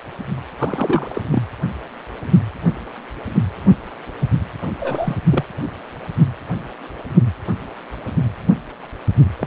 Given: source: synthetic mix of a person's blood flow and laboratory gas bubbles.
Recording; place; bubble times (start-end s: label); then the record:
Doppler ultrasound of blood flow; precordium
0.58-1.21 s: bubbles
1.30-1.42 s: bubbles
4.79-5.17 s: bubbles
5.30-5.45 s: bubbles
9.39-9.47 s: bubbles
From the record:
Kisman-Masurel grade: 222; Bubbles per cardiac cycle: several, 3 to 8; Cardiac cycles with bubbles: 10 to 50%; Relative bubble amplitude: moderate (0.250 to 0.450); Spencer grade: 2 (many but less than half of the cardiac periods contain bubble signals, singularly or in groups); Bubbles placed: anywhere in the cardiac cycle